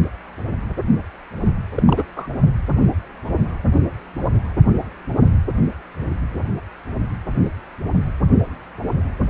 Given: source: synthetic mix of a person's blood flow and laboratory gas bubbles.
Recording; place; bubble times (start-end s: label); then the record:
Doppler ultrasound of blood flow; precordium
1.75-1.83 s: bubbles
1.86-2.04 s: bubbles
2.16-2.28 s: bubbles
From the record:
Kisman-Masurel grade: 222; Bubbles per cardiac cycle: several, 3 to 8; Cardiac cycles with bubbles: 10 to 50%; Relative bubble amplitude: moderate (0.250 to 0.450); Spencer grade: 2 (many but less than half of the cardiac periods contain bubble signals, singularly or in groups); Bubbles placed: only in the low amplitude regions of the cardiac cycle